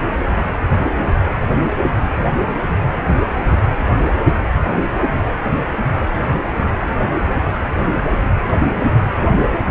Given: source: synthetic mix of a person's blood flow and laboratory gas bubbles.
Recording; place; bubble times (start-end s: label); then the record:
Doppler ultrasound of blood flow; precordium
no bubbles
From the record:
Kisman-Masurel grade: 000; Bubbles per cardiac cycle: 0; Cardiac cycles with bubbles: 0%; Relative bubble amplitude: no bubbles discernible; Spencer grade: 0 (complete lack of bubble signals)